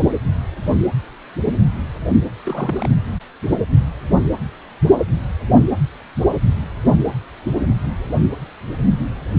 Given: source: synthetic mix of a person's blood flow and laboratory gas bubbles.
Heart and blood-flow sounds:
Doppler ultrasound of blood flow; precordium
2.43-2.90 s: bubbles
From the record:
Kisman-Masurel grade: 211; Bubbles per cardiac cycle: several, 3 to 8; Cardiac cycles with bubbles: 1 to 10%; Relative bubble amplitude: barely perceptible (0.100 to 0.250); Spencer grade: 1 (occasional bubble signal discernible with the cardiac motion signal, with majority of cardiac periods free of bubbles); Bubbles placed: anywhere in the cardiac cycle

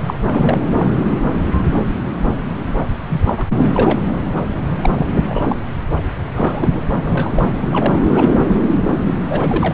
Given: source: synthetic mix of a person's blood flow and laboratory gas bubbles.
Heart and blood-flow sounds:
Doppler ultrasound of blood flow; subclavian vein
0.07-0.14 s: bubbles
0.26-0.59 s: bubbles
0.77-0.92 s: bubbles
3.08-3.48 s: bubbles
3.58-3.71 s: bubbles
3.73-4.00 s: bubbles
4.83-4.90 s: bubbles
4.95-5.06 s: bubbles
5.27-5.62 s: bubbles
6.34-6.88 s: bubbles
7.06-7.55 s: bubbles
7.71-7.96 s: bubbles
8.07-8.29 s: bubbles
9.29-9.74 s: bubbles
From the record:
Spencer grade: 3 (all of the cardiac periods contain showers or single bubble signals, but not dominating or overriding the cardiac motion signals); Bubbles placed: anywhere in the cardiac cycle

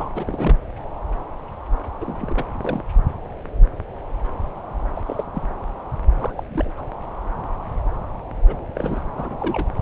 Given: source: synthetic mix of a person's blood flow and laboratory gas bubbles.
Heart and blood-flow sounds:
Doppler ultrasound of blood flow; subclavian vein
0.00-0.08 s: bubbles
0.15-0.57 s: bubbles
2.00-2.44 s: bubbles
2.58-2.83 s: bubbles
4.96-5.01 s: bubbles
5.06-5.24 s: bubbles
5.35-5.42 s: bubbles
6.17-6.32 s: bubbles
6.35-6.43 s: bubbles
6.49-6.71 s: bubbles
6.77-6.82 s: bubbles
8.47-8.55 s: bubbles
8.74-9.03 s: bubbles
9.17-9.67 s: bubbles
9.79-9.82 s: bubbles
From the record:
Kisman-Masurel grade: 221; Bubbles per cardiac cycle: several, 3 to 8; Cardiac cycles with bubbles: 10 to 50%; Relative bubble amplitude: barely perceptible (0.100 to 0.250); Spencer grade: 2 (many but less than half of the cardiac periods contain bubble signals, singularly or in groups); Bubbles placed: anywhere in the cardiac cycle

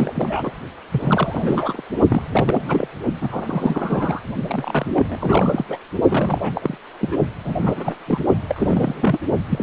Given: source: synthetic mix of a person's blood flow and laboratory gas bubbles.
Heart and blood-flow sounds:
Doppler ultrasound of blood flow; precordium
0.00-0.52 s: bubbles
0.91-1.81 s: bubbles
2.10-2.88 s: bubbles
3.21-4.21 s: bubbles
4.47-5.65 s: bubbles
5.68-5.78 s: bubbles
6.08-6.52 s: bubbles
6.55-6.78 s: bubbles
7.00-7.17 s: bubbles
7.45-7.96 s: bubbles
8.06-8.25 s: bubbles
8.49-9.18 s: bubbles
9.49-9.63 s: bubbles
From the record:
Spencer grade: 3 (all of the cardiac periods contain showers or single bubble signals, but not dominating or overriding the cardiac motion signals); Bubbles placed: only in the low amplitude regions of the cardiac cycle

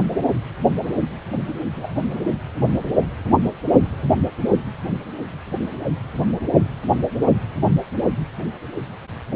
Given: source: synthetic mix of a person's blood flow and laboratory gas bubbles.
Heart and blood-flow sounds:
Doppler ultrasound of blood flow; precordium
1.73-1.98 s: bubbles
From the record:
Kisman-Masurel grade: 111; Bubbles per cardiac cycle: 1 to 2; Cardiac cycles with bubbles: 1 to 10%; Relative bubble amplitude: barely perceptible (0.100 to 0.250); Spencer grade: 1 (occasional bubble signal discernible with the cardiac motion signal, with majority of cardiac periods free of bubbles); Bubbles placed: anywhere in the cardiac cycle

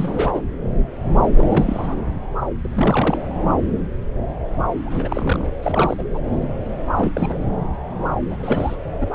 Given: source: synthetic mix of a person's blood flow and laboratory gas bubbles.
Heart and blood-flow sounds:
Doppler ultrasound of blood flow; subclavian vein
0.00-0.41 s: bubbles
1.34-1.96 s: bubbles
2.58-3.25 s: bubbles
4.85-5.51 s: bubbles
5.62-6.04 s: bubbles
6.14-6.18 s: bubbles
6.97-7.11 s: bubbles
7.13-7.40 s: bubbles
8.30-8.76 s: bubbles
9.00-9.06 s: bubbles
9.12-9.15 s: bubbles
From the record:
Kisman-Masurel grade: 332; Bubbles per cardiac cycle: rolling drumbeat, 9 or more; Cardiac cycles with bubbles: 50 to 99%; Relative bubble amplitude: moderate (0.250 to 0.450); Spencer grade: 3 (all of the cardiac periods contain showers or single bubble signals, but not dominating or overriding the cardiac motion signals); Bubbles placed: anywhere in the cardiac cycle

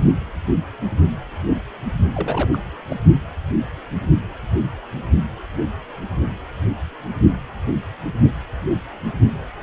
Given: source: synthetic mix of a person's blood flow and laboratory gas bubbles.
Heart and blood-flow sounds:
Doppler ultrasound of blood flow; precordium
2.13-2.58 s: bubbles
2.88-2.96 s: bubbles
From the record:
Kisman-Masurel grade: 211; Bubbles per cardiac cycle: several, 3 to 8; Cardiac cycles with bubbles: 1 to 10%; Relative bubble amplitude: barely perceptible (0.100 to 0.250); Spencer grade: 1 (occasional bubble signal discernible with the cardiac motion signal, with majority of cardiac periods free of bubbles); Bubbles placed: only in the low amplitude regions of the cardiac cycle

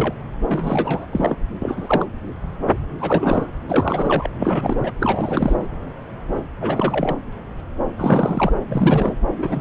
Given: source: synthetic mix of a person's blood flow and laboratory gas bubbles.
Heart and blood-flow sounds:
Doppler ultrasound of blood flow; subclavian vein
0.00-0.14 s: bubbles
0.49-1.06 s: bubbles
1.12-1.36 s: bubbles
1.61-2.06 s: bubbles
3.00-3.52 s: bubbles
3.69-4.29 s: bubbles
4.38-4.91 s: bubbles
5.00-5.67 s: bubbles
6.61-7.17 s: bubbles
7.97-8.53 s: bubbles
8.68-9.13 s: bubbles
9.36-9.61 s: bubbles
From the record:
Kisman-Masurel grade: 333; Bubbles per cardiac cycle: rolling drumbeat, 9 or more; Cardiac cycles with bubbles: 50 to 99%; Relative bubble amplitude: loud (0.450 to 0.775); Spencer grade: 3 (all of the cardiac periods contain showers or single bubble signals, but not dominating or overriding the cardiac motion signals); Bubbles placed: anywhere in the cardiac cycle

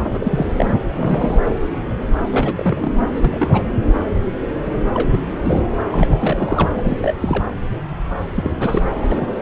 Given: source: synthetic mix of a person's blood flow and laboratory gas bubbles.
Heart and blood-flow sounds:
Doppler ultrasound of blood flow; subclavian vein
0.00-0.46 s: bubbles
0.58-0.75 s: bubbles
0.95-1.38 s: bubbles
2.30-2.53 s: bubbles
2.55-2.92 s: bubbles
3.16-3.62 s: bubbles
4.94-5.20 s: bubbles
5.43-5.62 s: bubbles
5.88-6.69 s: bubbles
6.78-6.97 s: bubbles
7.02-7.14 s: bubbles
7.20-7.44 s: bubbles
8.36-8.50 s: bubbles
8.60-8.83 s: bubbles
9.08-9.27 s: bubbles
9.37-9.42 s: bubbles
From the record:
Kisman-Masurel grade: 232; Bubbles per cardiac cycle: several, 3 to 8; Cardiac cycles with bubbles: 50 to 99%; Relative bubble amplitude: moderate (0.250 to 0.450); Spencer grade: 3 (all of the cardiac periods contain showers or single bubble signals, but not dominating or overriding the cardiac motion signals); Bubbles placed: anywhere in the cardiac cycle

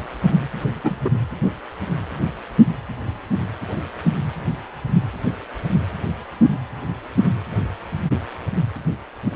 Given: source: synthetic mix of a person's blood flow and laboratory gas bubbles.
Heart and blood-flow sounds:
Doppler ultrasound of blood flow; precordium
0.83-0.95 s: bubbles
1.04-1.10 s: bubbles
From the record:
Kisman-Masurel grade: 113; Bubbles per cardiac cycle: 1 to 2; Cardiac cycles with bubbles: 1 to 10%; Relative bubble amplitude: loud (0.450 to 0.775); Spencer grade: 1 (occasional bubble signal discernible with the cardiac motion signal, with majority of cardiac periods free of bubbles); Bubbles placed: anywhere in the cardiac cycle

